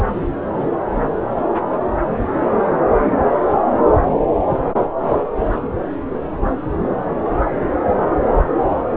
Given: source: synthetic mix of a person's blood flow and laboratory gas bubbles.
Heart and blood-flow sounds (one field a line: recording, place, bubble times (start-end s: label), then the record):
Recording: Doppler ultrasound of blood flow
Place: subclavian vein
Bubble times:
0.00-0.06 s: bubbles
From the record:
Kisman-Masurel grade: 111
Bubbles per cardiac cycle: 1 to 2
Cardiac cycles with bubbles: 1 to 10%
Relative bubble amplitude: barely perceptible (0.100 to 0.250)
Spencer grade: 1 (occasional bubble signal discernible with the cardiac motion signal, with majority of cardiac periods free of bubbles)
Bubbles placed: anywhere in the cardiac cycle